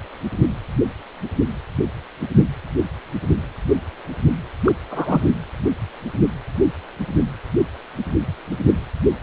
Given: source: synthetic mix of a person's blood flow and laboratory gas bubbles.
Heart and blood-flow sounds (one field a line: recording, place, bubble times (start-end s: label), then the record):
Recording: Doppler ultrasound of blood flow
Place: precordium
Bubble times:
4.64-4.72 s: bubbles
4.91-5.35 s: bubbles
From the record:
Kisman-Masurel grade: 212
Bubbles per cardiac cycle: several, 3 to 8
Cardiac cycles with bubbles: 1 to 10%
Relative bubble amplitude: moderate (0.250 to 0.450)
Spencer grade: 1 (occasional bubble signal discernible with the cardiac motion signal, with majority of cardiac periods free of bubbles)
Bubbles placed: anywhere in the cardiac cycle